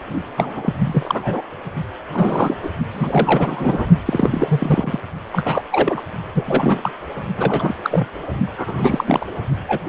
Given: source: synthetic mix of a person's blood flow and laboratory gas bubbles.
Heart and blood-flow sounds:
Doppler ultrasound of blood flow; precordium
0.36-0.73 s: bubbles
0.78-1.41 s: bubbles
2.12-2.55 s: bubbles
2.62-2.70 s: bubbles
2.94-3.87 s: bubbles
4.05-5.00 s: bubbles
5.32-5.62 s: bubbles
5.71-6.01 s: bubbles
6.34-6.91 s: bubbles
7.37-7.74 s: bubbles
7.82-8.09 s: bubbles
8.57-9.04 s: bubbles
9.06-9.32 s: bubbles
9.68-9.80 s: bubbles
From the record:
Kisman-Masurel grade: 342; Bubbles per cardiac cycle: rolling drumbeat, 9 or more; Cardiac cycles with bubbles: 100%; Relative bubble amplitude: moderate (0.250 to 0.450); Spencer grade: 3 (all of the cardiac periods contain showers or single bubble signals, but not dominating or overriding the cardiac motion signals); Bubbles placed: only in the low amplitude regions of the cardiac cycle

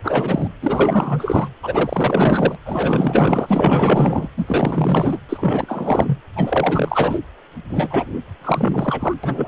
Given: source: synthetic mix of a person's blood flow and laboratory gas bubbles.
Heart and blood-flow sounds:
Doppler ultrasound of blood flow; precordium
0.03-0.47 s: bubbles
0.61-1.48 s: bubbles
1.62-2.58 s: bubbles
2.65-4.29 s: bubbles
4.37-5.19 s: bubbles
5.29-6.19 s: bubbles
6.36-7.19 s: bubbles
7.69-8.21 s: bubbles
8.40-9.13 s: bubbles
9.23-9.48 s: bubbles
From the record:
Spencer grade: 4 (maximum detectable bubble signal sounding continuously throughout systole and diastole of every cardiac period, and overriding the amplitude of the normal cardiac signals); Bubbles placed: anywhere in the cardiac cycle

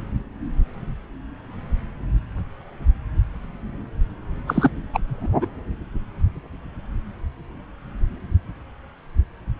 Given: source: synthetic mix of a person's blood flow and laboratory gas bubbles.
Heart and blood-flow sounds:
Doppler ultrasound of blood flow; subclavian vein
4.47-4.71 s: bubbles
4.93-5.00 s: bubbles
5.08-5.31 s: bubbles
5.41-5.47 s: bubbles
From the record:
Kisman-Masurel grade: 223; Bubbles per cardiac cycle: several, 3 to 8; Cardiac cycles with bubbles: 10 to 50%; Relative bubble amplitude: loud (0.450 to 0.775); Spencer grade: 2 (many but less than half of the cardiac periods contain bubble signals, singularly or in groups); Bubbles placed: anywhere in the cardiac cycle

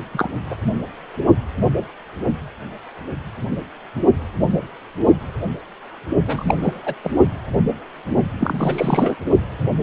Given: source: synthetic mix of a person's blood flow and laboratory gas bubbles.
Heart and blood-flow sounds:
Doppler ultrasound of blood flow; precordium
0.12-0.29 s: bubbles
0.50-0.56 s: bubbles
6.27-6.57 s: bubbles
6.63-6.82 s: bubbles
6.86-6.94 s: bubbles
7.04-7.11 s: bubbles
8.38-9.15 s: bubbles
From the record:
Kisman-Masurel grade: 222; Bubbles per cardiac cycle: several, 3 to 8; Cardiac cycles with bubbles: 10 to 50%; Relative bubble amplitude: moderate (0.250 to 0.450); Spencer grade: 2 (many but less than half of the cardiac periods contain bubble signals, singularly or in groups); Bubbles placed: only in the low amplitude regions of the cardiac cycle

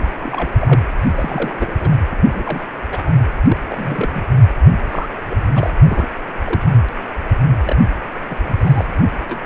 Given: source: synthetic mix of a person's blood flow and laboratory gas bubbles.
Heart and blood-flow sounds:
Doppler ultrasound of blood flow; precordium
0.02-0.50 s: bubbles
0.57-0.82 s: bubbles
1.02-1.76 s: bubbles
1.80-1.95 s: bubbles
2.11-2.16 s: bubbles
2.25-2.61 s: bubbles
2.90-3.02 s: bubbles
3.05-3.11 s: bubbles
3.47-3.57 s: bubbles
3.70-4.24 s: bubbles
4.91-5.07 s: bubbles
5.29-5.37 s: bubbles
5.53-5.70 s: bubbles
5.87-6.06 s: bubbles
6.45-6.65 s: bubbles
7.65-7.76 s: bubbles
8.29-8.36 s: bubbles
8.45-8.54 s: bubbles
8.59-8.85 s: bubbles
9.29-9.38 s: bubbles
9.44-9.46 s: bubbles
From the record:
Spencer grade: 3 (all of the cardiac periods contain showers or single bubble signals, but not dominating or overriding the cardiac motion signals); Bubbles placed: anywhere in the cardiac cycle

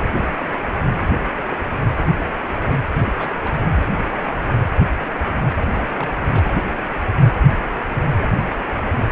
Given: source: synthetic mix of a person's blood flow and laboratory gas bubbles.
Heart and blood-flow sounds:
Doppler ultrasound of blood flow; precordium
3.05-3.12 s: bubbles
3.15-3.35 s: bubbles
3.44-3.61 s: bubbles
3.76-3.98 s: bubbles
4.12-4.34 s: bubbles
5.67-5.88 s: bubbles
5.95-6.09 s: bubbles
6.26-6.53 s: bubbles
From the record:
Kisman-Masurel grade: 221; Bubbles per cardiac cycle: several, 3 to 8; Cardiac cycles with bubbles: 10 to 50%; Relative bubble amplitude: barely perceptible (0.100 to 0.250); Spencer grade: 2 (many but less than half of the cardiac periods contain bubble signals, singularly or in groups); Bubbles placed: anywhere in the cardiac cycle

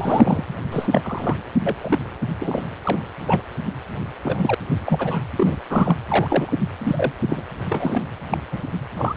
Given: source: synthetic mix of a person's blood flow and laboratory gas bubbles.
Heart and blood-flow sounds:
Doppler ultrasound of blood flow; precordium
0.00-0.44 s: bubbles
0.71-1.37 s: bubbles
1.66-1.77 s: bubbles
1.81-1.99 s: bubbles
2.40-2.67 s: bubbles
2.83-3.08 s: bubbles
3.26-3.42 s: bubbles
4.23-4.54 s: bubbles
4.86-5.22 s: bubbles
5.36-5.59 s: bubbles
5.70-5.96 s: bubbles
6.07-6.54 s: bubbles
6.81-7.12 s: bubbles
7.29-7.43 s: bubbles
7.69-8.03 s: bubbles
8.30-8.38 s: bubbles
8.52-8.61 s: bubbles
8.96-9.14 s: bubbles
From the record:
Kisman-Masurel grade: 232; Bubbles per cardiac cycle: several, 3 to 8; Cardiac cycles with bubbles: 50 to 99%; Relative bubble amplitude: moderate (0.250 to 0.450); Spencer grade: 3 (all of the cardiac periods contain showers or single bubble signals, but not dominating or overriding the cardiac motion signals); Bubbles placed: anywhere in the cardiac cycle

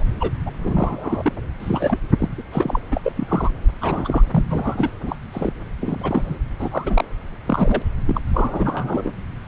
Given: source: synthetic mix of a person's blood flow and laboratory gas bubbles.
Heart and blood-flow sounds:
Doppler ultrasound of blood flow; subclavian vein
0.00-0.04 s: bubbles
0.20-0.31 s: bubbles
0.46-0.52 s: bubbles
0.63-1.33 s: bubbles
1.59-1.99 s: bubbles
2.19-2.28 s: bubbles
2.38-2.42 s: bubbles
2.52-2.80 s: bubbles
2.92-3.12 s: bubbles
3.15-3.51 s: bubbles
3.81-4.23 s: bubbles
4.30-4.92 s: bubbles
5.03-5.16 s: bubbles
5.32-5.53 s: bubbles
5.80-6.37 s: bubbles
6.59-7.04 s: bubbles
7.46-7.82 s: bubbles
8.06-8.21 s: bubbles
8.33-9.13 s: bubbles
From the record:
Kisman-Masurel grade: 232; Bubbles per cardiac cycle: several, 3 to 8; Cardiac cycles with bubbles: 50 to 99%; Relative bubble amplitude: moderate (0.250 to 0.450); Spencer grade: 3 (all of the cardiac periods contain showers or single bubble signals, but not dominating or overriding the cardiac motion signals); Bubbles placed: anywhere in the cardiac cycle

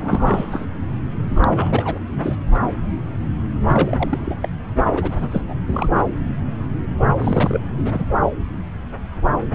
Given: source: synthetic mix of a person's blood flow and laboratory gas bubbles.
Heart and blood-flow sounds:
Doppler ultrasound of blood flow; subclavian vein
0.00-0.67 s: bubbles
1.17-1.25 s: bubbles
1.35-1.99 s: bubbles
2.23-2.35 s: bubbles
3.67-4.35 s: bubbles
4.42-4.48 s: bubbles
4.94-5.26 s: bubbles
5.30-5.42 s: bubbles
5.47-5.54 s: bubbles
5.68-5.89 s: bubbles
7.18-7.60 s: bubbles
7.77-8.04 s: bubbles
From the record:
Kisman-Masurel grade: 332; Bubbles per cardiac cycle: rolling drumbeat, 9 or more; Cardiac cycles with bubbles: 50 to 99%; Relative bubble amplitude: moderate (0.250 to 0.450); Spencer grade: 3 (all of the cardiac periods contain showers or single bubble signals, but not dominating or overriding the cardiac motion signals); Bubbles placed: anywhere in the cardiac cycle

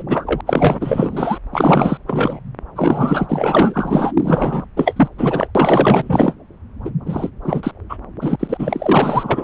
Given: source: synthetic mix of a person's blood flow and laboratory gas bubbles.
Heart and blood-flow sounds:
Doppler ultrasound of blood flow; subclavian vein
0.00-0.04 s: bubbles
0.07-0.41 s: bubbles
0.46-1.38 s: bubbles
1.52-1.98 s: bubbles
2.06-2.40 s: bubbles
2.76-4.12 s: bubbles
4.17-4.65 s: bubbles
4.76-5.08 s: bubbles
5.18-5.47 s: bubbles
5.55-6.36 s: bubbles
6.84-6.90 s: bubbles
7.05-7.30 s: bubbles
7.44-7.71 s: bubbles
7.89-7.98 s: bubbles
8.21-8.36 s: bubbles
8.39-9.44 s: bubbles
From the record:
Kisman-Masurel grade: 444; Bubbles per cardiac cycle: continuous sound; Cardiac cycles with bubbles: 100%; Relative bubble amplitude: maximal (0.775 to 0.999); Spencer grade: 4 (maximum detectable bubble signal sounding continuously throughout systole and diastole of every cardiac period, and overriding the amplitude of the normal cardiac signals); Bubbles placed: anywhere in the cardiac cycle

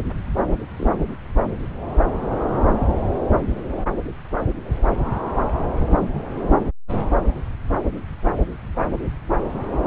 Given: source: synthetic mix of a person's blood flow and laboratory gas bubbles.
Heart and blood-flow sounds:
Doppler ultrasound of blood flow; subclavian vein
0.78-0.95 s: bubbles
From the record:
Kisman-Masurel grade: 121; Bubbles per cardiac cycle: 1 to 2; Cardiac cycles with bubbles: 10 to 50%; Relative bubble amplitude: barely perceptible (0.100 to 0.250); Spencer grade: 2 (many but less than half of the cardiac periods contain bubble signals, singularly or in groups); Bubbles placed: anywhere in the cardiac cycle

